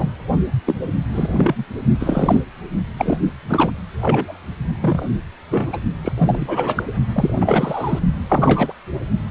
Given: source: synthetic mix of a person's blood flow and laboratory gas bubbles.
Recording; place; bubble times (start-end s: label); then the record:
Doppler ultrasound of blood flow; precordium
0.00-0.10 s: bubbles
0.66-0.76 s: bubbles
1.12-1.64 s: bubbles
1.99-2.43 s: bubbles
2.98-3.18 s: bubbles
3.48-3.72 s: bubbles
4.00-4.38 s: bubbles
4.80-5.06 s: bubbles
5.50-5.68 s: bubbles
5.72-5.77 s: bubbles
6.04-6.12 s: bubbles
6.17-6.83 s: bubbles
7.13-7.99 s: bubbles
8.28-8.72 s: bubbles
From the record:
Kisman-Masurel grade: 243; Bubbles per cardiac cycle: several, 3 to 8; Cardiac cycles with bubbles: 100%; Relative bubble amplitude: loud (0.450 to 0.775); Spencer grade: 3 (all of the cardiac periods contain showers or single bubble signals, but not dominating or overriding the cardiac motion signals); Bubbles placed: only in the low amplitude regions of the cardiac cycle